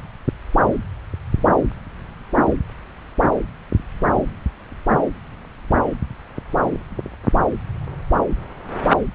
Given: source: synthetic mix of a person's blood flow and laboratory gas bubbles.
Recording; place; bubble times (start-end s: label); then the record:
Doppler ultrasound of blood flow; subclavian vein
no bubbles
From the record:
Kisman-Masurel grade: 000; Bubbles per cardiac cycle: 0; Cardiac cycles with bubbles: 0%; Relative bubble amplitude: no bubbles discernible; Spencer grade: 0 (complete lack of bubble signals)